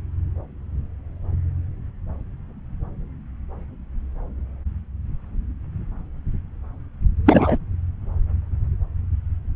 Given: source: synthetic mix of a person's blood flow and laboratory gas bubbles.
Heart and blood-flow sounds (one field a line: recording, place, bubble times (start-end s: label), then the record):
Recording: Doppler ultrasound of blood flow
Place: subclavian vein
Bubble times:
7.26-7.58 s: bubbles
From the record:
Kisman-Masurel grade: 213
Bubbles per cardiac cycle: several, 3 to 8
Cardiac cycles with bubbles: 1 to 10%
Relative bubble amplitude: loud (0.450 to 0.775)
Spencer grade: 1 (occasional bubble signal discernible with the cardiac motion signal, with majority of cardiac periods free of bubbles)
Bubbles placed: anywhere in the cardiac cycle